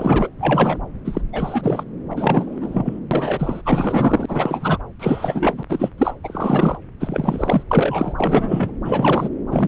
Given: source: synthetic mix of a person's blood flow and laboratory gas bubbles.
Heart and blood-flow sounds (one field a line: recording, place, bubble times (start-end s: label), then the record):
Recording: Doppler ultrasound of blood flow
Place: subclavian vein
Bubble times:
0.00-0.29 s: bubbles
0.38-0.81 s: bubbles
1.05-1.22 s: bubbles
1.32-1.83 s: bubbles
2.10-3.00 s: bubbles
3.11-3.62 s: bubbles
3.65-4.78 s: bubbles
4.99-5.63 s: bubbles
5.69-5.90 s: bubbles
5.98-6.14 s: bubbles
6.23-6.77 s: bubbles
7.00-7.63 s: bubbles
7.70-8.14 s: bubbles
8.17-8.72 s: bubbles
8.84-9.29 s: bubbles
9.50-9.68 s: bubbles
From the record:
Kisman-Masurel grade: 343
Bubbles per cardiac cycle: rolling drumbeat, 9 or more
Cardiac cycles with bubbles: 100%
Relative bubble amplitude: loud (0.450 to 0.775)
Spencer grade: 3 (all of the cardiac periods contain showers or single bubble signals, but not dominating or overriding the cardiac motion signals)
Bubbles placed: anywhere in the cardiac cycle